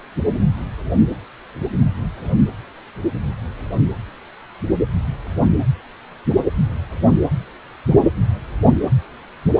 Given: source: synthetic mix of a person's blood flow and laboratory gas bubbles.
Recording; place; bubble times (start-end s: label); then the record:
Doppler ultrasound of blood flow; precordium
no bubbles
From the record:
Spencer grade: 0 (complete lack of bubble signals)